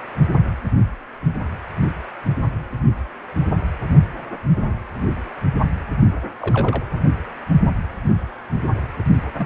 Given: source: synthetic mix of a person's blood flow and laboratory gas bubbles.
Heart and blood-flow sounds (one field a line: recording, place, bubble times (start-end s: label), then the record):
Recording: Doppler ultrasound of blood flow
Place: precordium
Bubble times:
4.93-5.08 s: bubbles
6.42-6.83 s: bubbles
9.35-9.45 s: bubbles
From the record:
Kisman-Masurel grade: 121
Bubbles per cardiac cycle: 1 to 2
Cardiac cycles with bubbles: 10 to 50%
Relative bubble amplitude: barely perceptible (0.100 to 0.250)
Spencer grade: 2 (many but less than half of the cardiac periods contain bubble signals, singularly or in groups)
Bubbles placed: anywhere in the cardiac cycle